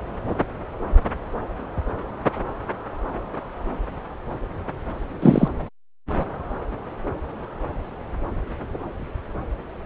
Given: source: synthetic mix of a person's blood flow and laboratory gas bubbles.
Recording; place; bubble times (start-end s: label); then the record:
Doppler ultrasound of blood flow; subclavian vein
5.22-5.48 s: bubbles
From the record:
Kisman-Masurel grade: 113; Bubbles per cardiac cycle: 1 to 2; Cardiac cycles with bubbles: 1 to 10%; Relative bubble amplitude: loud (0.450 to 0.775); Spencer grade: 1 (occasional bubble signal discernible with the cardiac motion signal, with majority of cardiac periods free of bubbles); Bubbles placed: anywhere in the cardiac cycle